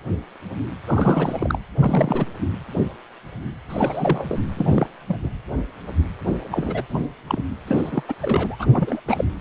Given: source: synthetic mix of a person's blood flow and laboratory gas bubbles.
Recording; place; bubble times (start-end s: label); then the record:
Doppler ultrasound of blood flow; precordium
0.87-1.58 s: bubbles
1.77-2.27 s: bubbles
3.69-4.41 s: bubbles
4.56-4.87 s: bubbles
5.08-5.17 s: bubbles
5.23-5.30 s: bubbles
6.51-6.82 s: bubbles
6.89-7.02 s: bubbles
7.28-7.45 s: bubbles
7.67-8.03 s: bubbles
8.08-8.14 s: bubbles
8.21-8.55 s: bubbles
8.59-8.68 s: bubbles
8.72-9.01 s: bubbles
9.07-9.25 s: bubbles
From the record:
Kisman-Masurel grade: 332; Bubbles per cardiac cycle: rolling drumbeat, 9 or more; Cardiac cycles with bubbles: 50 to 99%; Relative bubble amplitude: moderate (0.250 to 0.450); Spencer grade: 3 (all of the cardiac periods contain showers or single bubble signals, but not dominating or overriding the cardiac motion signals); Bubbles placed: anywhere in the cardiac cycle